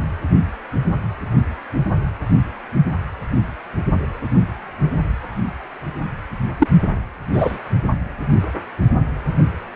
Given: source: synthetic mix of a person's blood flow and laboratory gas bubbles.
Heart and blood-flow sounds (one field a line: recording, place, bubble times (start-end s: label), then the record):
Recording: Doppler ultrasound of blood flow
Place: precordium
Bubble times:
6.59-6.67 s: bubbles
7.33-7.58 s: bubbles
From the record:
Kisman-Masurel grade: 123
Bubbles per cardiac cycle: 1 to 2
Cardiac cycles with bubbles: 10 to 50%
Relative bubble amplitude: loud (0.450 to 0.775)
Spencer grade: 2 (many but less than half of the cardiac periods contain bubble signals, singularly or in groups)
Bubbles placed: anywhere in the cardiac cycle